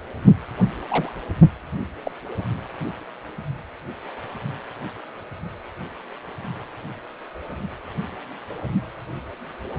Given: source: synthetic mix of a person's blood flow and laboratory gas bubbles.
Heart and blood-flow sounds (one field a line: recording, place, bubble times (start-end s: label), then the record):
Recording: Doppler ultrasound of blood flow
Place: precordium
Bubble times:
0.88-1.11 s: bubbles
2.05-2.11 s: bubbles
From the record:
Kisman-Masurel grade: 111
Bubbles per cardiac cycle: 1 to 2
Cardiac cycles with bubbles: 1 to 10%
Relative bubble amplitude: barely perceptible (0.100 to 0.250)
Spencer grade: 1 (occasional bubble signal discernible with the cardiac motion signal, with majority of cardiac periods free of bubbles)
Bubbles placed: anywhere in the cardiac cycle